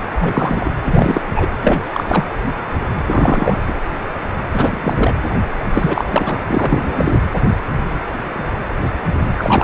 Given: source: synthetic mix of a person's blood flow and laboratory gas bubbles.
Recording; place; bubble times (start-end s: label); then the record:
Doppler ultrasound of blood flow; precordium
0.12-0.70 s: bubbles
0.83-1.21 s: bubbles
1.35-1.47 s: bubbles
1.61-1.82 s: bubbles
1.93-2.25 s: bubbles
3.07-3.57 s: bubbles
3.67-3.73 s: bubbles
4.53-5.14 s: bubbles
5.74-6.05 s: bubbles
6.11-6.42 s: bubbles
6.47-7.18 s: bubbles
9.38-9.64 s: bubbles
From the record:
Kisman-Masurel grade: 333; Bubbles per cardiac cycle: rolling drumbeat, 9 or more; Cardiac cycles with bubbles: 50 to 99%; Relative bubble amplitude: loud (0.450 to 0.775); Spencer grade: 3 (all of the cardiac periods contain showers or single bubble signals, but not dominating or overriding the cardiac motion signals); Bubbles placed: anywhere in the cardiac cycle